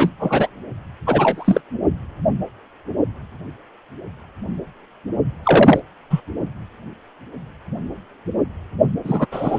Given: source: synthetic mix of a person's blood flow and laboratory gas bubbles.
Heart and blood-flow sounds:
Doppler ultrasound of blood flow; precordium
0.00-0.10 s: bubbles
0.19-0.48 s: bubbles
1.06-1.61 s: bubbles
5.43-5.79 s: bubbles
6.10-6.21 s: bubbles
9.04-9.26 s: bubbles
9.31-9.59 s: bubbles
From the record:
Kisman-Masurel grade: 223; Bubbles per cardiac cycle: several, 3 to 8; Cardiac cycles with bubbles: 10 to 50%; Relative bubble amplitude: loud (0.450 to 0.775); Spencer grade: 2 (many but less than half of the cardiac periods contain bubble signals, singularly or in groups); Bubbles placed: only in the low amplitude regions of the cardiac cycle

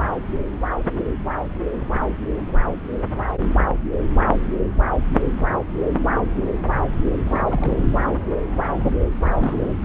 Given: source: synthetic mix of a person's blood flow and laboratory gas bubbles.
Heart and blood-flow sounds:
Doppler ultrasound of blood flow; subclavian vein
7.25-7.88 s: bubbles
9.19-9.73 s: bubbles
From the record:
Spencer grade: 2 (many but less than half of the cardiac periods contain bubble signals, singularly or in groups); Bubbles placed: anywhere in the cardiac cycle

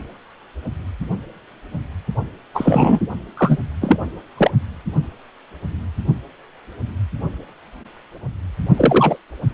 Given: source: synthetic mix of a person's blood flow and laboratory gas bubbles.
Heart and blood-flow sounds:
Doppler ultrasound of blood flow; precordium
2.54-2.99 s: bubbles
3.37-3.57 s: bubbles
3.81-3.96 s: bubbles
4.37-4.51 s: bubbles
8.77-9.18 s: bubbles
From the record:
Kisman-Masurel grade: 233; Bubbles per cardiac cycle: several, 3 to 8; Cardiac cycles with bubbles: 50 to 99%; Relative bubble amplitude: loud (0.450 to 0.775); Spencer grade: 3 (all of the cardiac periods contain showers or single bubble signals, but not dominating or overriding the cardiac motion signals); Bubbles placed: only in the low amplitude regions of the cardiac cycle

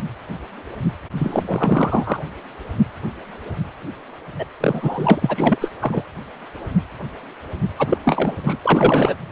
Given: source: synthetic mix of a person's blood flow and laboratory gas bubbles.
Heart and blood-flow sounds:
Doppler ultrasound of blood flow; precordium
1.16-2.23 s: bubbles
4.38-4.45 s: bubbles
4.60-5.58 s: bubbles
5.61-5.71 s: bubbles
5.79-6.04 s: bubbles
7.78-7.87 s: bubbles
7.90-7.98 s: bubbles
8.04-8.36 s: bubbles
8.43-8.56 s: bubbles
8.63-9.15 s: bubbles
From the record:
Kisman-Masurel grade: 333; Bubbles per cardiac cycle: rolling drumbeat, 9 or more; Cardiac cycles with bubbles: 50 to 99%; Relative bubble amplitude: loud (0.450 to 0.775); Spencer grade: 3 (all of the cardiac periods contain showers or single bubble signals, but not dominating or overriding the cardiac motion signals); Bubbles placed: anywhere in the cardiac cycle

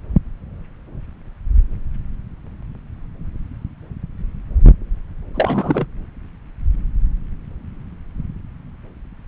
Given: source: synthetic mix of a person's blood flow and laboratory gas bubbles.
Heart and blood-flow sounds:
Doppler ultrasound of blood flow; subclavian vein
5.34-5.87 s: bubbles
From the record:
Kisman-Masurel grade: 222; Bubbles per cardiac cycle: several, 3 to 8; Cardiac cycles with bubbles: 10 to 50%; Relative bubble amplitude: moderate (0.250 to 0.450); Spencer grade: 2 (many but less than half of the cardiac periods contain bubble signals, singularly or in groups); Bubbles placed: anywhere in the cardiac cycle

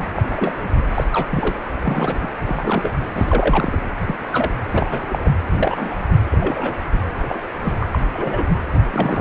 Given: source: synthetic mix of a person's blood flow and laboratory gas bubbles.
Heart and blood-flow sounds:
Doppler ultrasound of blood flow; precordium
0.00-0.06 s: bubbles
0.16-0.22 s: bubbles
0.30-0.64 s: bubbles
0.94-1.04 s: bubbles
1.12-1.26 s: bubbles
1.31-1.56 s: bubbles
1.82-2.28 s: bubbles
2.46-2.92 s: bubbles
3.15-3.81 s: bubbles
4.06-4.16 s: bubbles
4.32-4.51 s: bubbles
4.72-5.00 s: bubbles
5.09-5.29 s: bubbles
5.57-5.98 s: bubbles
6.31-6.75 s: bubbles
7.19-7.48 s: bubbles
7.63-7.74 s: bubbles
7.77-7.86 s: bubbles
7.91-7.99 s: bubbles
8.10-8.46 s: bubbles
8.91-9.21 s: bubbles
From the record:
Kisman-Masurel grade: 242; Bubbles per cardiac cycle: several, 3 to 8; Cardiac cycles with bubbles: 100%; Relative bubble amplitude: moderate (0.250 to 0.450); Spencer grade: 3 (all of the cardiac periods contain showers or single bubble signals, but not dominating or overriding the cardiac motion signals); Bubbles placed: anywhere in the cardiac cycle

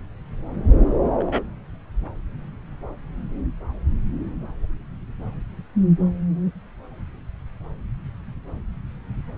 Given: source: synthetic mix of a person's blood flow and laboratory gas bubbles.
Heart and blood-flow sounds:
Doppler ultrasound of blood flow; subclavian vein
1.19-1.44 s: bubbles
From the record:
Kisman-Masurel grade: 113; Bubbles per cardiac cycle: 1 to 2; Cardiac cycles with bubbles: 1 to 10%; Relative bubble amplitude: loud (0.450 to 0.775); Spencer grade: 1 (occasional bubble signal discernible with the cardiac motion signal, with majority of cardiac periods free of bubbles); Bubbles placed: anywhere in the cardiac cycle

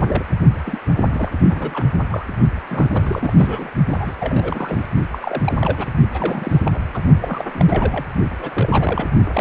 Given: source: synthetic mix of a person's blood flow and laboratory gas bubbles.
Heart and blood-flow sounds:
Doppler ultrasound of blood flow; precordium
0.00-0.25 s: bubbles
0.66-0.79 s: bubbles
1.13-1.31 s: bubbles
1.49-1.86 s: bubbles
2.10-2.25 s: bubbles
2.69-3.33 s: bubbles
3.38-3.71 s: bubbles
3.87-4.14 s: bubbles
4.20-4.85 s: bubbles
5.12-5.58 s: bubbles
5.60-5.86 s: bubbles
6.10-6.62 s: bubbles
6.66-6.79 s: bubbles
6.93-7.00 s: bubbles
7.21-7.45 s: bubbles
7.54-8.05 s: bubbles
8.40-9.07 s: bubbles
9.32-9.41 s: bubbles
From the record:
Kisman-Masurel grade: 342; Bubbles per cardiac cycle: rolling drumbeat, 9 or more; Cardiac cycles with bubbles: 100%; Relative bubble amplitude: moderate (0.250 to 0.450); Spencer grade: 3 (all of the cardiac periods contain showers or single bubble signals, but not dominating or overriding the cardiac motion signals); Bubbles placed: only in the low amplitude regions of the cardiac cycle

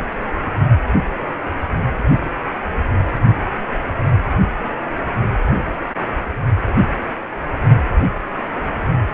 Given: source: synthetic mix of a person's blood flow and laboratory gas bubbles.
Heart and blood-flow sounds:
Doppler ultrasound of blood flow; precordium
no bubbles
From the record:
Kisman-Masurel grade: 000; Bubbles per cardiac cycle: 0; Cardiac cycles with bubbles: 0%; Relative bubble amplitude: no bubbles discernible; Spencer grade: 0 (complete lack of bubble signals)

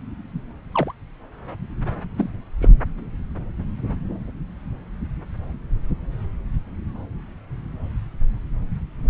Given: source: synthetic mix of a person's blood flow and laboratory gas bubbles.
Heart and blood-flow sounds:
Doppler ultrasound of blood flow; subclavian vein
0.72-0.94 s: bubbles
2.16-2.29 s: bubbles
2.60-2.69 s: bubbles
From the record:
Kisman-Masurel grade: 122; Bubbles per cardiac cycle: 1 to 2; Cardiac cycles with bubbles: 10 to 50%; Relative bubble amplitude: moderate (0.250 to 0.450); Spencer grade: 2 (many but less than half of the cardiac periods contain bubble signals, singularly or in groups); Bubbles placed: anywhere in the cardiac cycle

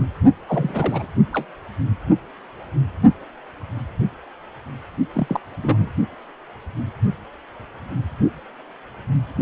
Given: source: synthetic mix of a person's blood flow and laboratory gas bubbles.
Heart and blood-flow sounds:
Doppler ultrasound of blood flow; precordium
0.47-1.07 s: bubbles
1.32-1.46 s: bubbles
5.14-5.40 s: bubbles
5.62-5.91 s: bubbles
From the record:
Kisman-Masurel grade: 222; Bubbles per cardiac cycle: several, 3 to 8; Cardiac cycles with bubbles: 10 to 50%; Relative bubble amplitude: moderate (0.250 to 0.450); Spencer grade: 2 (many but less than half of the cardiac periods contain bubble signals, singularly or in groups); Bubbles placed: only in the low amplitude regions of the cardiac cycle

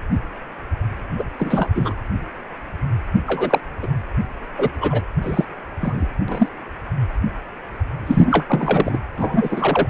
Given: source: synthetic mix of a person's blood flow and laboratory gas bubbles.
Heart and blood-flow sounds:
Doppler ultrasound of blood flow; precordium
1.18-1.23 s: bubbles
1.38-1.70 s: bubbles
1.74-1.94 s: bubbles
3.27-3.60 s: bubbles
3.82-3.88 s: bubbles
4.58-4.70 s: bubbles
4.80-5.02 s: bubbles
5.23-5.45 s: bubbles
5.81-6.06 s: bubbles
6.28-6.49 s: bubbles
8.06-8.46 s: bubbles
8.48-8.99 s: bubbles
9.16-9.87 s: bubbles
From the record:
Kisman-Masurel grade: 233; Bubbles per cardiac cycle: several, 3 to 8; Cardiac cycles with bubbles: 50 to 99%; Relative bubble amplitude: loud (0.450 to 0.775); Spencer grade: 3 (all of the cardiac periods contain showers or single bubble signals, but not dominating or overriding the cardiac motion signals); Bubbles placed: anywhere in the cardiac cycle

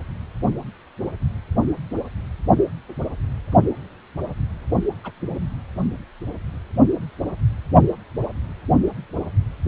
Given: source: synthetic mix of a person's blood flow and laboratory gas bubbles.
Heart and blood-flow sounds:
Doppler ultrasound of blood flow; precordium
5.04-5.12 s: bubbles
5.28-5.41 s: bubbles
From the record:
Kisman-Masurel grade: 111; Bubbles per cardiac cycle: 1 to 2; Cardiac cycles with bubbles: 1 to 10%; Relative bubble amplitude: barely perceptible (0.100 to 0.250); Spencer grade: 1 (occasional bubble signal discernible with the cardiac motion signal, with majority of cardiac periods free of bubbles); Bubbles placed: only in the low amplitude regions of the cardiac cycle

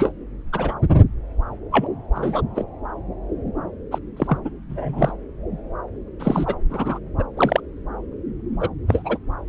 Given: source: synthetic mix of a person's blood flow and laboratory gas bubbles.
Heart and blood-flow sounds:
Doppler ultrasound of blood flow; subclavian vein
0.00-0.11 s: bubbles
0.52-0.76 s: bubbles
1.72-1.86 s: bubbles
2.15-2.42 s: bubbles
2.55-2.64 s: bubbles
3.91-3.98 s: bubbles
4.17-4.38 s: bubbles
4.44-4.50 s: bubbles
4.69-5.12 s: bubbles
6.19-6.54 s: bubbles
6.70-6.99 s: bubbles
7.19-7.24 s: bubbles
7.37-7.61 s: bubbles
8.60-8.69 s: bubbles
8.88-9.18 s: bubbles
From the record:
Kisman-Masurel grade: 242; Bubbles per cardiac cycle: several, 3 to 8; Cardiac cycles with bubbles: 100%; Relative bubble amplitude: moderate (0.250 to 0.450); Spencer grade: 3 (all of the cardiac periods contain showers or single bubble signals, but not dominating or overriding the cardiac motion signals); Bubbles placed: anywhere in the cardiac cycle

